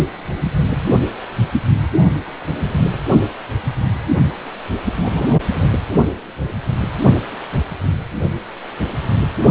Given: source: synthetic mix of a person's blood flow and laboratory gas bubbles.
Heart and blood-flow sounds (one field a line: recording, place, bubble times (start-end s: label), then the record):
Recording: Doppler ultrasound of blood flow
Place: precordium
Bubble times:
5.02-5.28 s: bubbles
5.49-5.69 s: bubbles
From the record:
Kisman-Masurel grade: 112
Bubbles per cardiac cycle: 1 to 2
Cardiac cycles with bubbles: 1 to 10%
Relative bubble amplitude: moderate (0.250 to 0.450)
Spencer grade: 1 (occasional bubble signal discernible with the cardiac motion signal, with majority of cardiac periods free of bubbles)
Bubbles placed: only in the low amplitude regions of the cardiac cycle